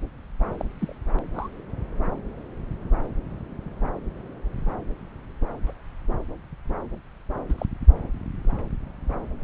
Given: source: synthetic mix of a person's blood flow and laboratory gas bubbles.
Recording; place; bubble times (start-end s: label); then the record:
Doppler ultrasound of blood flow; subclavian vein
0.57-0.65 s: bubbles
0.80-0.94 s: bubbles
1.34-1.48 s: bubbles
5.67-5.72 s: bubbles
7.49-7.54 s: bubbles
7.58-7.66 s: bubbles
From the record:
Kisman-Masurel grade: 121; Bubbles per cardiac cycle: 1 to 2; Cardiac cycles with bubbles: 10 to 50%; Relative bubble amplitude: barely perceptible (0.100 to 0.250); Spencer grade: 2 (many but less than half of the cardiac periods contain bubble signals, singularly or in groups); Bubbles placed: anywhere in the cardiac cycle